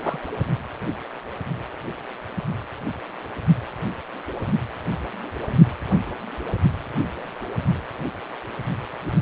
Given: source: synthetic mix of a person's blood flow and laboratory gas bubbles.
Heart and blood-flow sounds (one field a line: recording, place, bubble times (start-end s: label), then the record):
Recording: Doppler ultrasound of blood flow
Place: precordium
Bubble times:
0.03-0.20 s: bubbles
From the record:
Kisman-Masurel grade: 111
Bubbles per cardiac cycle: 1 to 2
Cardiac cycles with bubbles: 1 to 10%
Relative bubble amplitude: barely perceptible (0.100 to 0.250)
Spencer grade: 1 (occasional bubble signal discernible with the cardiac motion signal, with majority of cardiac periods free of bubbles)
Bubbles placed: anywhere in the cardiac cycle